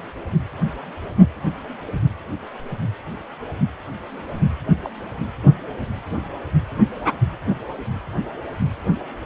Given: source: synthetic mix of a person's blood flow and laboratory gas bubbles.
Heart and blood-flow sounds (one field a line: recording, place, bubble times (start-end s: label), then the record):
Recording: Doppler ultrasound of blood flow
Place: precordium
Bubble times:
4.83-4.89 s: bubbles
From the record:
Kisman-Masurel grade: 121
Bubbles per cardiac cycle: 1 to 2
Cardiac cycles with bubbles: 10 to 50%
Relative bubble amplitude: barely perceptible (0.100 to 0.250)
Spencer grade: 2 (many but less than half of the cardiac periods contain bubble signals, singularly or in groups)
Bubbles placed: anywhere in the cardiac cycle